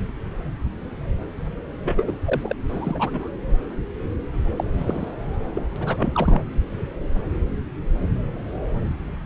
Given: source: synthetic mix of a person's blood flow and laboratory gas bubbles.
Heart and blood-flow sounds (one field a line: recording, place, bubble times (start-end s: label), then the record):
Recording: Doppler ultrasound of blood flow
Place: subclavian vein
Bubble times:
1.84-2.16 s: bubbles
2.25-2.55 s: bubbles
2.69-3.29 s: bubbles
4.56-4.64 s: bubbles
4.78-5.14 s: bubbles
5.54-5.63 s: bubbles
5.76-6.42 s: bubbles
From the record:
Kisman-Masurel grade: 222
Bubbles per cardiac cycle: several, 3 to 8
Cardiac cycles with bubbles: 10 to 50%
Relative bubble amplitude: moderate (0.250 to 0.450)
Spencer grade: 2 (many but less than half of the cardiac periods contain bubble signals, singularly or in groups)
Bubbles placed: anywhere in the cardiac cycle